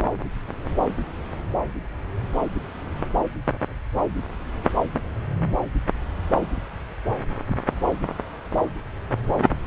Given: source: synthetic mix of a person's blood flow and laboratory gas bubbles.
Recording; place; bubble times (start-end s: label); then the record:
Doppler ultrasound of blood flow; subclavian vein
no bubbles
From the record:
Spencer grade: 0 (complete lack of bubble signals)